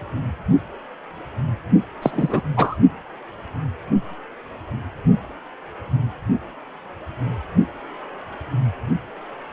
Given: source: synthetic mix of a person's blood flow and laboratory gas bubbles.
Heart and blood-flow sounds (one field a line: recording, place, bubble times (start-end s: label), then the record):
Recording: Doppler ultrasound of blood flow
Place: precordium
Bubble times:
2.02-2.42 s: bubbles
2.56-2.77 s: bubbles
From the record:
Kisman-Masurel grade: 213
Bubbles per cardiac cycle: several, 3 to 8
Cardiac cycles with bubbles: 1 to 10%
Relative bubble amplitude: loud (0.450 to 0.775)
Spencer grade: 1 (occasional bubble signal discernible with the cardiac motion signal, with majority of cardiac periods free of bubbles)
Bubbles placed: only in the low amplitude regions of the cardiac cycle